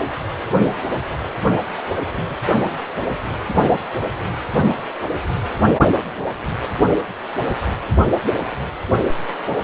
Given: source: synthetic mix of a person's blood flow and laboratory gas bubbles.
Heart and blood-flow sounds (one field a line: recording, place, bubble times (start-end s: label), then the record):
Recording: Doppler ultrasound of blood flow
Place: precordium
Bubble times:
2.16-2.37 s: bubbles
From the record:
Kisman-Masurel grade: 111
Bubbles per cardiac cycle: 1 to 2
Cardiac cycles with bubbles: 1 to 10%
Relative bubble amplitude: barely perceptible (0.100 to 0.250)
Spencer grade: 1 (occasional bubble signal discernible with the cardiac motion signal, with majority of cardiac periods free of bubbles)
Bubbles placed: only in the low amplitude regions of the cardiac cycle